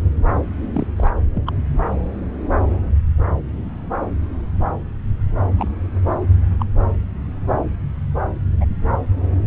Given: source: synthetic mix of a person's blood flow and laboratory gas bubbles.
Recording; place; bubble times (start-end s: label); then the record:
Doppler ultrasound of blood flow; subclavian vein
0.74-0.87 s: bubbles
0.96-1.11 s: bubbles
1.34-1.44 s: bubbles
1.46-1.53 s: bubbles
5.57-5.71 s: bubbles
6.21-6.26 s: bubbles
6.59-6.65 s: bubbles
8.61-8.66 s: bubbles
From the record:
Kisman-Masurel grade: 122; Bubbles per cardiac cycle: 1 to 2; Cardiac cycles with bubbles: 10 to 50%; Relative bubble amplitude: moderate (0.250 to 0.450); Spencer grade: 2 (many but less than half of the cardiac periods contain bubble signals, singularly or in groups); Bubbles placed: anywhere in the cardiac cycle